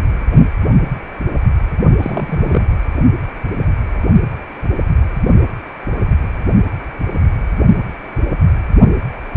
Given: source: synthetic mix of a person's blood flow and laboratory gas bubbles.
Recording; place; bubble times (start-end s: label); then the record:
Doppler ultrasound of blood flow; precordium
2.00-2.65 s: bubbles
From the record:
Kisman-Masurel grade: 212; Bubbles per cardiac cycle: several, 3 to 8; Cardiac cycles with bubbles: 1 to 10%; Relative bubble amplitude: moderate (0.250 to 0.450); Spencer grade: 1 (occasional bubble signal discernible with the cardiac motion signal, with majority of cardiac periods free of bubbles); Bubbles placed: only in the low amplitude regions of the cardiac cycle